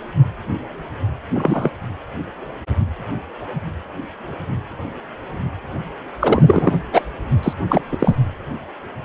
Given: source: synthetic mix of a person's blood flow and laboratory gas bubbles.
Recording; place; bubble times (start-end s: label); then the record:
Doppler ultrasound of blood flow; precordium
1.33-1.71 s: bubbles
6.20-6.77 s: bubbles
6.92-7.02 s: bubbles
7.42-7.53 s: bubbles
7.69-7.82 s: bubbles
7.91-8.16 s: bubbles
From the record:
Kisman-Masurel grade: 223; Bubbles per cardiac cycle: several, 3 to 8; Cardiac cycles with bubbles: 10 to 50%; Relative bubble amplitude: loud (0.450 to 0.775); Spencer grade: 2 (many but less than half of the cardiac periods contain bubble signals, singularly or in groups); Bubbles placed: anywhere in the cardiac cycle